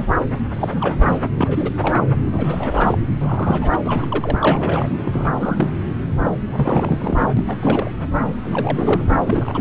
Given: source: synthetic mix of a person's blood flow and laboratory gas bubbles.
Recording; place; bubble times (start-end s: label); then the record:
Doppler ultrasound of blood flow; subclavian vein
0.00-0.23 s: bubbles
0.32-0.40 s: bubbles
0.53-1.19 s: bubbles
1.37-1.73 s: bubbles
1.77-2.01 s: bubbles
2.31-2.98 s: bubbles
3.19-3.79 s: bubbles
3.84-4.89 s: bubbles
5.05-5.69 s: bubbles
6.24-6.31 s: bubbles
6.47-7.29 s: bubbles
7.37-7.44 s: bubbles
7.47-7.58 s: bubbles
7.61-7.91 s: bubbles
8.21-8.35 s: bubbles
8.44-9.04 s: bubbles
9.21-9.61 s: bubbles
From the record:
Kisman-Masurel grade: 342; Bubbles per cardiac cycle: rolling drumbeat, 9 or more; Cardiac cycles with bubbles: 100%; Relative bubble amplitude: moderate (0.250 to 0.450); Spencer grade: 3 (all of the cardiac periods contain showers or single bubble signals, but not dominating or overriding the cardiac motion signals); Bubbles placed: anywhere in the cardiac cycle